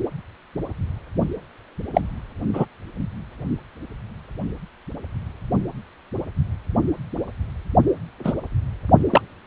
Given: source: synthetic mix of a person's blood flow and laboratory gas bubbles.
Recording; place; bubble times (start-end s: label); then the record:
Doppler ultrasound of blood flow; precordium
1.94-2.01 s: bubbles
2.53-2.65 s: bubbles
8.24-8.34 s: bubbles
9.10-9.21 s: bubbles
From the record:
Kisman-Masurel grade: 123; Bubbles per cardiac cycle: 1 to 2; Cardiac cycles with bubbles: 10 to 50%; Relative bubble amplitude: loud (0.450 to 0.775); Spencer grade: 2 (many but less than half of the cardiac periods contain bubble signals, singularly or in groups); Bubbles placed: only in the low amplitude regions of the cardiac cycle